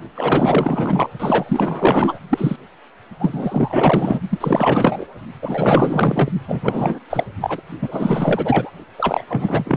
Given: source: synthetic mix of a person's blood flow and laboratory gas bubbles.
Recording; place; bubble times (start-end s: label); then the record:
Doppler ultrasound of blood flow; precordium
0.15-1.10 s: bubbles
1.19-2.19 s: bubbles
2.29-2.56 s: bubbles
3.20-4.21 s: bubbles
4.30-4.38 s: bubbles
4.40-5.06 s: bubbles
5.42-6.30 s: bubbles
6.47-6.99 s: bubbles
7.10-7.24 s: bubbles
7.40-7.61 s: bubbles
7.81-8.71 s: bubbles
8.98-9.26 s: bubbles
9.29-9.77 s: bubbles
From the record:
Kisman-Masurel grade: 444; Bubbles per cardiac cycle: continuous sound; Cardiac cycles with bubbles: 100%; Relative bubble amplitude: maximal (0.775 to 0.999); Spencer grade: 4 (maximum detectable bubble signal sounding continuously throughout systole and diastole of every cardiac period, and overriding the amplitude of the normal cardiac signals); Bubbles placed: only in the low amplitude regions of the cardiac cycle